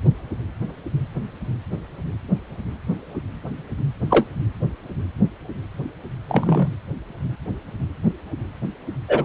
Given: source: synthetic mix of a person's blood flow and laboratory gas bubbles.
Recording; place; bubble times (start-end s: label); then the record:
Doppler ultrasound of blood flow; precordium
4.09-4.25 s: bubbles
6.29-6.69 s: bubbles
9.08-9.24 s: bubbles
From the record:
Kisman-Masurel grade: 123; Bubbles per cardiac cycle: 1 to 2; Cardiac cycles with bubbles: 10 to 50%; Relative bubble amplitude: loud (0.450 to 0.775); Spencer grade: 2 (many but less than half of the cardiac periods contain bubble signals, singularly or in groups); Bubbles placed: anywhere in the cardiac cycle